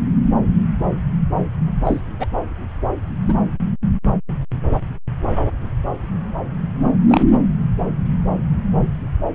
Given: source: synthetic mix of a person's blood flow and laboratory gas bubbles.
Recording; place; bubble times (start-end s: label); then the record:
Doppler ultrasound of blood flow; subclavian vein
1.84-2.02 s: bubbles
2.19-2.27 s: bubbles
3.28-3.34 s: bubbles
7.08-7.25 s: bubbles
From the record:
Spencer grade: 2 (many but less than half of the cardiac periods contain bubble signals, singularly or in groups); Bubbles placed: anywhere in the cardiac cycle